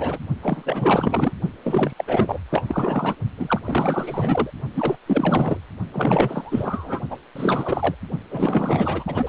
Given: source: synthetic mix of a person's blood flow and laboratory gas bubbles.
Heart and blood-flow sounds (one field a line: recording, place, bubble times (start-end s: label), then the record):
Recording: Doppler ultrasound of blood flow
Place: precordium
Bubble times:
0.00-0.19 s: bubbles
0.42-1.32 s: bubbles
1.62-1.93 s: bubbles
1.96-2.04 s: bubbles
2.07-2.40 s: bubbles
2.50-2.65 s: bubbles
2.67-3.15 s: bubbles
3.37-3.60 s: bubbles
3.64-4.50 s: bubbles
4.75-4.96 s: bubbles
5.06-5.62 s: bubbles
5.92-7.00 s: bubbles
7.10-7.17 s: bubbles
7.36-7.95 s: bubbles
8.30-9.29 s: bubbles
From the record:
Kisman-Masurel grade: 444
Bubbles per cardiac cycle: continuous sound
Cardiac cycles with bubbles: 100%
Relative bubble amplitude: maximal (0.775 to 0.999)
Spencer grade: 4 (maximum detectable bubble signal sounding continuously throughout systole and diastole of every cardiac period, and overriding the amplitude of the normal cardiac signals)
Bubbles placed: only in the low amplitude regions of the cardiac cycle